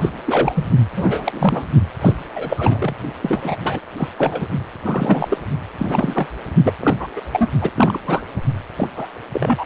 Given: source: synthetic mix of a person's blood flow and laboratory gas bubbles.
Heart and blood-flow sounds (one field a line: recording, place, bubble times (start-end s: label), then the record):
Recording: Doppler ultrasound of blood flow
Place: precordium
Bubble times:
0.01-0.10 s: bubbles
0.25-0.65 s: bubbles
0.96-1.65 s: bubbles
2.01-2.13 s: bubbles
2.34-2.94 s: bubbles
3.22-3.57 s: bubbles
3.64-3.81 s: bubbles
3.98-4.09 s: bubbles
4.17-4.48 s: bubbles
4.84-5.37 s: bubbles
5.78-6.28 s: bubbles
6.64-6.74 s: bubbles
6.79-6.95 s: bubbles
7.00-7.08 s: bubbles
7.16-7.21 s: bubbles
7.32-7.49 s: bubbles
7.61-7.99 s: bubbles
8.06-8.21 s: bubbles
8.77-8.88 s: bubbles
8.96-9.07 s: bubbles
9.33-9.64 s: bubbles
From the record:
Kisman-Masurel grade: 342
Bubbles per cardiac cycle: rolling drumbeat, 9 or more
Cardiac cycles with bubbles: 100%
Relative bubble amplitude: moderate (0.250 to 0.450)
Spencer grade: 3 (all of the cardiac periods contain showers or single bubble signals, but not dominating or overriding the cardiac motion signals)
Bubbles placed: only in the low amplitude regions of the cardiac cycle